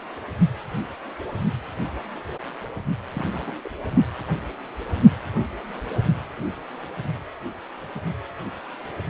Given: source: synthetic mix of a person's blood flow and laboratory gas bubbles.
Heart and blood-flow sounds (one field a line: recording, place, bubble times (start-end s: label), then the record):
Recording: Doppler ultrasound of blood flow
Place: precordium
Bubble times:
3.14-3.29 s: bubbles
3.32-3.53 s: bubbles
3.64-3.69 s: bubbles
From the record:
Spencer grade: 1 (occasional bubble signal discernible with the cardiac motion signal, with majority of cardiac periods free of bubbles)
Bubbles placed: only in the low amplitude regions of the cardiac cycle